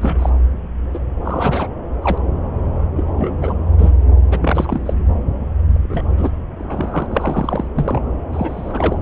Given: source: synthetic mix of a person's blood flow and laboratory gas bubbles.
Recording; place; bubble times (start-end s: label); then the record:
Doppler ultrasound of blood flow; subclavian vein
0.01-0.30 s: bubbles
0.94-0.99 s: bubbles
1.25-1.68 s: bubbles
2.02-2.18 s: bubbles
2.96-3.31 s: bubbles
3.41-3.54 s: bubbles
3.78-3.91 s: bubbles
4.31-4.38 s: bubbles
4.41-4.94 s: bubbles
5.72-6.10 s: bubbles
6.17-6.30 s: bubbles
6.59-7.07 s: bubbles
7.10-7.68 s: bubbles
7.75-8.01 s: bubbles
8.32-8.98 s: bubbles
From the record:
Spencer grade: 3 (all of the cardiac periods contain showers or single bubble signals, but not dominating or overriding the cardiac motion signals); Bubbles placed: anywhere in the cardiac cycle